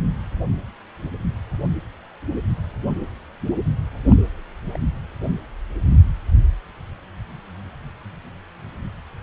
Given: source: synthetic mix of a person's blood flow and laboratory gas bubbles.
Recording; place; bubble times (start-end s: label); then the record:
Doppler ultrasound of blood flow; precordium
4.10-4.14 s: bubbles
4.73-4.77 s: bubbles
From the record:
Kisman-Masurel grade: 121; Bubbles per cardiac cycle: 1 to 2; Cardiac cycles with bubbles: 10 to 50%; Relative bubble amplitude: barely perceptible (0.100 to 0.250); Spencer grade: 2 (many but less than half of the cardiac periods contain bubble signals, singularly or in groups); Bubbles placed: anywhere in the cardiac cycle